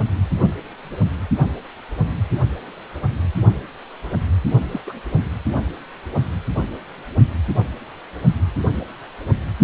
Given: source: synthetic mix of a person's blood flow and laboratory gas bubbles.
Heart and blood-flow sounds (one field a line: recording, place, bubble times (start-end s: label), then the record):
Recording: Doppler ultrasound of blood flow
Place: precordium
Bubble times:
4.71-4.81 s: bubbles
4.87-4.93 s: bubbles
From the record:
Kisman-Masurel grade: 211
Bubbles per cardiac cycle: several, 3 to 8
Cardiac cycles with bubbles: 1 to 10%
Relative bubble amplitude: barely perceptible (0.100 to 0.250)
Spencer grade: 1 (occasional bubble signal discernible with the cardiac motion signal, with majority of cardiac periods free of bubbles)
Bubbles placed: only in the low amplitude regions of the cardiac cycle